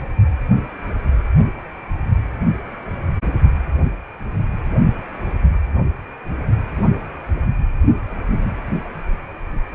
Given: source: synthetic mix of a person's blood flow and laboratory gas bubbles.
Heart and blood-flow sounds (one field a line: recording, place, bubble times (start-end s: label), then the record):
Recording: Doppler ultrasound of blood flow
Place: precordium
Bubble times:
no bubbles
From the record:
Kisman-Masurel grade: 000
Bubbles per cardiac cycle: 0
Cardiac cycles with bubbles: 0%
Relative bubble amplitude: no bubbles discernible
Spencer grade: 0 (complete lack of bubble signals)